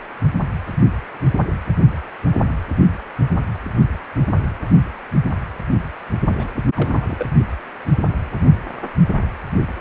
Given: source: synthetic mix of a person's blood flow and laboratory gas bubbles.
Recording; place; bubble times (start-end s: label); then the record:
Doppler ultrasound of blood flow; precordium
6.29-6.33 s: bubbles
6.38-6.49 s: bubbles
6.75-7.26 s: bubbles
From the record:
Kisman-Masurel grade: 211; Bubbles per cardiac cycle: several, 3 to 8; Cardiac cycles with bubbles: 1 to 10%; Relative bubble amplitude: barely perceptible (0.100 to 0.250); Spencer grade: 1 (occasional bubble signal discernible with the cardiac motion signal, with majority of cardiac periods free of bubbles); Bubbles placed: only in the low amplitude regions of the cardiac cycle